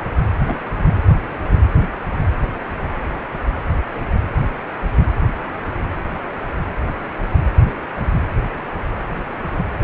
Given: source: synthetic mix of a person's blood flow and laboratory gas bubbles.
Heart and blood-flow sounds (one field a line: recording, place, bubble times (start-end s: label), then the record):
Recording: Doppler ultrasound of blood flow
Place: precordium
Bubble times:
0.44-0.59 s: bubbles
0.68-0.92 s: bubbles
From the record:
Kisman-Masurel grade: 211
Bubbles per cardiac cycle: several, 3 to 8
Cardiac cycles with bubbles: 1 to 10%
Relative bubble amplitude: barely perceptible (0.100 to 0.250)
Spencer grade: 1 (occasional bubble signal discernible with the cardiac motion signal, with majority of cardiac periods free of bubbles)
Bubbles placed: anywhere in the cardiac cycle